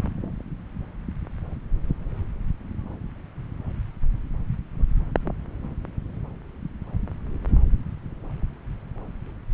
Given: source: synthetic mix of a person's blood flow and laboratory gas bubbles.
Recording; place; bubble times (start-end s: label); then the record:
Doppler ultrasound of blood flow; subclavian vein
no bubbles
From the record:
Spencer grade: 0 (complete lack of bubble signals)